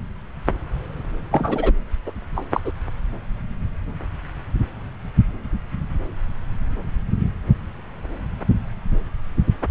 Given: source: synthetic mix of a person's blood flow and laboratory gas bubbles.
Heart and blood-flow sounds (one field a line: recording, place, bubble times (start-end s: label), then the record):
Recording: Doppler ultrasound of blood flow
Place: subclavian vein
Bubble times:
1.31-1.73 s: bubbles
2.06-2.13 s: bubbles
2.35-2.45 s: bubbles
2.54-2.60 s: bubbles
2.64-2.73 s: bubbles
From the record:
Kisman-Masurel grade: 222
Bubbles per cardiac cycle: several, 3 to 8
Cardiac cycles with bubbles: 10 to 50%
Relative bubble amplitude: moderate (0.250 to 0.450)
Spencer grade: 2 (many but less than half of the cardiac periods contain bubble signals, singularly or in groups)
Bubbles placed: anywhere in the cardiac cycle